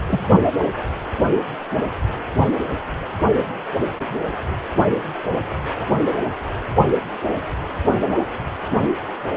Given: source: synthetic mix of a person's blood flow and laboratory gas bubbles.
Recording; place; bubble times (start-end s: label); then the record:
Doppler ultrasound of blood flow; precordium
0.07-0.26 s: bubbles
From the record:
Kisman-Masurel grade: 212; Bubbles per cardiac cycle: several, 3 to 8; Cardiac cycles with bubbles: 1 to 10%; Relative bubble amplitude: moderate (0.250 to 0.450); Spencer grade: 1 (occasional bubble signal discernible with the cardiac motion signal, with majority of cardiac periods free of bubbles); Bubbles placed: anywhere in the cardiac cycle